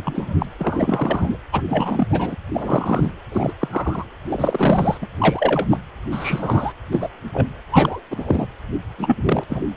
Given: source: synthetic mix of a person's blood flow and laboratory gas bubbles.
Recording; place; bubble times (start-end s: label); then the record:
Doppler ultrasound of blood flow; precordium
0.04-0.46 s: bubbles
0.58-1.37 s: bubbles
1.52-1.61 s: bubbles
1.69-2.07 s: bubbles
2.10-2.35 s: bubbles
2.54-3.12 s: bubbles
3.32-3.54 s: bubbles
3.60-4.06 s: bubbles
4.28-4.98 s: bubbles
5.02-5.08 s: bubbles
5.18-5.67 s: bubbles
5.70-5.77 s: bubbles
6.12-6.73 s: bubbles
6.92-7.08 s: bubbles
7.32-7.48 s: bubbles
7.71-8.00 s: bubbles
8.10-8.46 s: bubbles
8.98-9.16 s: bubbles
9.24-9.43 s: bubbles
9.48-9.64 s: bubbles
From the record:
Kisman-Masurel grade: 233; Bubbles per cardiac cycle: several, 3 to 8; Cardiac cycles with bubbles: 50 to 99%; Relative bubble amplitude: loud (0.450 to 0.775); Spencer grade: 3 (all of the cardiac periods contain showers or single bubble signals, but not dominating or overriding the cardiac motion signals); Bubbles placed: anywhere in the cardiac cycle